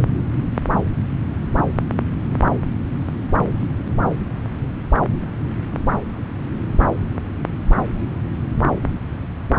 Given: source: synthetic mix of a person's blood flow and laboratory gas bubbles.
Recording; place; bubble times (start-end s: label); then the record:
Doppler ultrasound of blood flow; subclavian vein
no bubbles
From the record:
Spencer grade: 0 (complete lack of bubble signals)